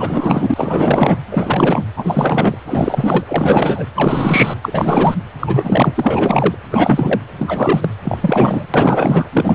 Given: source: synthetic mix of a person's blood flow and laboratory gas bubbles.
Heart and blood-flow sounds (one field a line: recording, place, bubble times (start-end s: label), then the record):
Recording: Doppler ultrasound of blood flow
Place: precordium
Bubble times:
0.00-1.17 s: bubbles
1.31-1.84 s: bubbles
1.97-2.57 s: bubbles
2.66-3.25 s: bubbles
3.28-3.88 s: bubbles
3.94-4.58 s: bubbles
4.62-5.14 s: bubbles
5.39-6.55 s: bubbles
6.71-7.19 s: bubbles
7.38-7.91 s: bubbles
8.04-8.18 s: bubbles
8.21-8.67 s: bubbles
8.74-9.29 s: bubbles
9.33-9.55 s: bubbles
From the record:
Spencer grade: 4 (maximum detectable bubble signal sounding continuously throughout systole and diastole of every cardiac period, and overriding the amplitude of the normal cardiac signals)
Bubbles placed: anywhere in the cardiac cycle